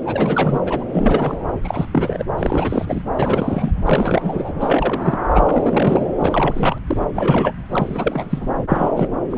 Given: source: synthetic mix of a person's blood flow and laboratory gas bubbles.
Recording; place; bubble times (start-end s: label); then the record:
Doppler ultrasound of blood flow; subclavian vein
0.05-0.61 s: bubbles
0.64-0.84 s: bubbles
0.93-1.36 s: bubbles
1.63-2.24 s: bubbles
2.38-3.03 s: bubbles
3.16-3.72 s: bubbles
3.85-4.53 s: bubbles
4.56-5.22 s: bubbles
5.32-6.08 s: bubbles
6.20-6.78 s: bubbles
6.87-6.97 s: bubbles
7.14-7.53 s: bubbles
7.71-8.51 s: bubbles
8.68-8.90 s: bubbles
8.96-9.07 s: bubbles
9.30-9.38 s: bubbles
From the record:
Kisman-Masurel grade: 342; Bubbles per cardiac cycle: rolling drumbeat, 9 or more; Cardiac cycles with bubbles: 100%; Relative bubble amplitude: moderate (0.250 to 0.450); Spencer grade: 3 (all of the cardiac periods contain showers or single bubble signals, but not dominating or overriding the cardiac motion signals); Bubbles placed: anywhere in the cardiac cycle